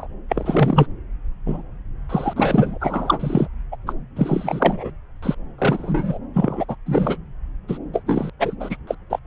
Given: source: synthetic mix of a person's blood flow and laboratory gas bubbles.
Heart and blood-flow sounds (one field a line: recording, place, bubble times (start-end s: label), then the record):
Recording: Doppler ultrasound of blood flow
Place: subclavian vein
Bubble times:
0.00-0.07 s: bubbles
0.28-0.87 s: bubbles
1.45-1.62 s: bubbles
2.09-2.33 s: bubbles
2.36-3.47 s: bubbles
3.71-3.75 s: bubbles
3.87-3.93 s: bubbles
4.16-4.91 s: bubbles
5.22-5.35 s: bubbles
5.58-6.18 s: bubbles
6.34-6.65 s: bubbles
6.68-6.75 s: bubbles
6.86-7.17 s: bubbles
7.68-7.78 s: bubbles
7.93-8.02 s: bubbles
8.06-8.30 s: bubbles
8.39-8.56 s: bubbles
8.60-8.77 s: bubbles
8.87-8.95 s: bubbles
9.10-9.19 s: bubbles
From the record:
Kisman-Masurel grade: 243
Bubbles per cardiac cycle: several, 3 to 8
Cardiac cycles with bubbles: 100%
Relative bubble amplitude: loud (0.450 to 0.775)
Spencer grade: 3 (all of the cardiac periods contain showers or single bubble signals, but not dominating or overriding the cardiac motion signals)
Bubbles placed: anywhere in the cardiac cycle